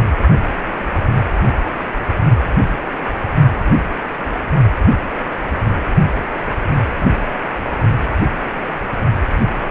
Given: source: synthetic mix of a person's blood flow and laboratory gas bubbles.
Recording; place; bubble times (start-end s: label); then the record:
Doppler ultrasound of blood flow; precordium
6.37-6.42 s: bubbles
6.86-7.16 s: bubbles
From the record:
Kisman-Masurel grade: 121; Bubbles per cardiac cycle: 1 to 2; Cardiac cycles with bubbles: 10 to 50%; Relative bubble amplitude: barely perceptible (0.100 to 0.250); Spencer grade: 2 (many but less than half of the cardiac periods contain bubble signals, singularly or in groups); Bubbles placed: only in the low amplitude regions of the cardiac cycle